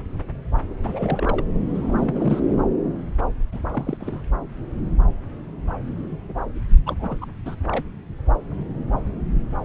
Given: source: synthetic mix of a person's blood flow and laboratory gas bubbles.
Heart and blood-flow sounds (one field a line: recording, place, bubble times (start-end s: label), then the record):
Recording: Doppler ultrasound of blood flow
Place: subclavian vein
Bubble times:
0.83-1.44 s: bubbles
1.66-2.62 s: bubbles
3.52-3.59 s: bubbles
3.73-3.97 s: bubbles
4.00-4.21 s: bubbles
6.86-7.15 s: bubbles
7.21-7.26 s: bubbles
7.46-7.55 s: bubbles
7.67-7.83 s: bubbles
From the record:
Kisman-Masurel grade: 221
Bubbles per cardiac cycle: several, 3 to 8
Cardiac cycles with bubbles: 10 to 50%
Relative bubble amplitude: barely perceptible (0.100 to 0.250)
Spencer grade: 2 (many but less than half of the cardiac periods contain bubble signals, singularly or in groups)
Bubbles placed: anywhere in the cardiac cycle